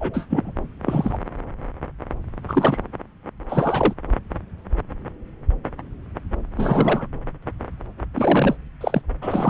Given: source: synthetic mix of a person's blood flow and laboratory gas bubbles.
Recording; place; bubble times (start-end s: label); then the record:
Doppler ultrasound of blood flow; subclavian vein
0.00-0.26 s: bubbles
0.30-0.52 s: bubbles
0.85-1.17 s: bubbles
2.48-2.81 s: bubbles
3.48-3.94 s: bubbles
6.56-7.06 s: bubbles
8.14-8.56 s: bubbles
8.80-9.01 s: bubbles
9.21-9.50 s: bubbles
From the record:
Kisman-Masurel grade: 232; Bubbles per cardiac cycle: several, 3 to 8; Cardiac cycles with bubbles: 50 to 99%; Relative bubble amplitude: moderate (0.250 to 0.450); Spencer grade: 3 (all of the cardiac periods contain showers or single bubble signals, but not dominating or overriding the cardiac motion signals); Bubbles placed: anywhere in the cardiac cycle